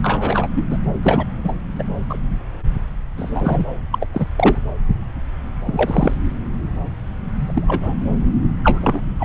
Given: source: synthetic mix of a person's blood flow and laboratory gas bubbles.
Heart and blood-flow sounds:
Doppler ultrasound of blood flow; subclavian vein
0.03-0.47 s: bubbles
0.54-0.65 s: bubbles
0.70-0.78 s: bubbles
1.03-1.26 s: bubbles
1.44-1.60 s: bubbles
1.79-1.83 s: bubbles
2.09-2.18 s: bubbles
3.17-3.65 s: bubbles
3.91-4.06 s: bubbles
4.14-4.26 s: bubbles
4.38-4.57 s: bubbles
5.66-6.14 s: bubbles
7.38-7.94 s: bubbles
8.63-9.00 s: bubbles
9.19-9.25 s: bubbles
From the record:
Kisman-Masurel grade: 232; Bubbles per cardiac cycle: several, 3 to 8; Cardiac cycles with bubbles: 50 to 99%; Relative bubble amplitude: moderate (0.250 to 0.450); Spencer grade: 3 (all of the cardiac periods contain showers or single bubble signals, but not dominating or overriding the cardiac motion signals); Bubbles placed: anywhere in the cardiac cycle

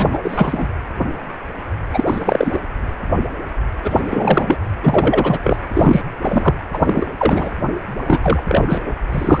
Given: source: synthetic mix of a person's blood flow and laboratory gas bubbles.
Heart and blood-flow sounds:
Doppler ultrasound of blood flow; precordium
0.00-0.10 s: bubbles
0.12-0.19 s: bubbles
0.24-0.68 s: bubbles
1.94-2.60 s: bubbles
3.84-4.57 s: bubbles
4.83-5.39 s: bubbles
5.42-5.57 s: bubbles
5.74-6.01 s: bubbles
6.21-6.54 s: bubbles
6.72-7.07 s: bubbles
7.18-7.50 s: bubbles
8.06-8.19 s: bubbles
8.22-8.43 s: bubbles
8.46-8.81 s: bubbles
8.86-8.91 s: bubbles
9.12-9.40 s: bubbles
From the record:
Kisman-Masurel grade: 333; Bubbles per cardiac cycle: rolling drumbeat, 9 or more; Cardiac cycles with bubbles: 50 to 99%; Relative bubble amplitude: loud (0.450 to 0.775); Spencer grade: 3 (all of the cardiac periods contain showers or single bubble signals, but not dominating or overriding the cardiac motion signals); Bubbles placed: anywhere in the cardiac cycle

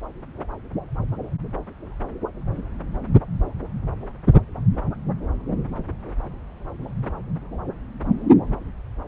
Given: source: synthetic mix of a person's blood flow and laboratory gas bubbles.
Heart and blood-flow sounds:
Doppler ultrasound of blood flow; subclavian vein
no bubbles
From the record:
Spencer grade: 0 (complete lack of bubble signals)

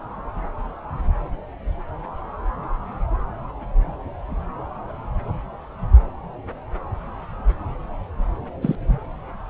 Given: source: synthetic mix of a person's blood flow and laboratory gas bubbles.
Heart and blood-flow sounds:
Doppler ultrasound of blood flow; subclavian vein
8.61-8.75 s: bubbles
8.88-8.99 s: bubbles
From the record:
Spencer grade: 1 (occasional bubble signal discernible with the cardiac motion signal, with majority of cardiac periods free of bubbles); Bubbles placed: anywhere in the cardiac cycle

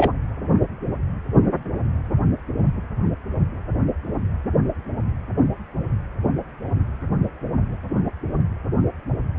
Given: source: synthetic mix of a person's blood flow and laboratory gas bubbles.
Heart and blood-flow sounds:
Doppler ultrasound of blood flow; precordium
0.00-0.10 s: bubbles
From the record:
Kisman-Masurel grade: 213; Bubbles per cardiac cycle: several, 3 to 8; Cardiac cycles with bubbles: 1 to 10%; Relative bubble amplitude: loud (0.450 to 0.775); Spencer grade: 1 (occasional bubble signal discernible with the cardiac motion signal, with majority of cardiac periods free of bubbles); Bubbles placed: anywhere in the cardiac cycle

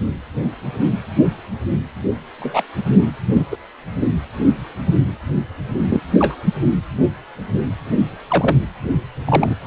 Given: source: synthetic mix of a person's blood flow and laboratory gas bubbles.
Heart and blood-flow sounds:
Doppler ultrasound of blood flow; precordium
2.40-2.62 s: bubbles
3.32-3.46 s: bubbles
3.51-3.56 s: bubbles
5.89-6.00 s: bubbles
6.18-6.35 s: bubbles
8.29-8.57 s: bubbles
9.25-9.54 s: bubbles
From the record:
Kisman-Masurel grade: 123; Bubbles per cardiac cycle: 1 to 2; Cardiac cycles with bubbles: 10 to 50%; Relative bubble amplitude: loud (0.450 to 0.775); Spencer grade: 2 (many but less than half of the cardiac periods contain bubble signals, singularly or in groups); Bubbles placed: anywhere in the cardiac cycle

